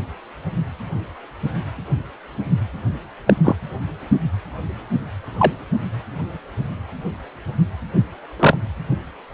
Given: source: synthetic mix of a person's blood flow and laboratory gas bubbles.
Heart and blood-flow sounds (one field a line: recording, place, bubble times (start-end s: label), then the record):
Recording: Doppler ultrasound of blood flow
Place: precordium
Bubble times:
3.27-3.33 s: bubbles
3.44-3.56 s: bubbles
5.38-5.52 s: bubbles
8.39-8.57 s: bubbles
From the record:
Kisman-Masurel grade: 123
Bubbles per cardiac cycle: 1 to 2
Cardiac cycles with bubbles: 10 to 50%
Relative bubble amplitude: loud (0.450 to 0.775)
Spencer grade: 2 (many but less than half of the cardiac periods contain bubble signals, singularly or in groups)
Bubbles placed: anywhere in the cardiac cycle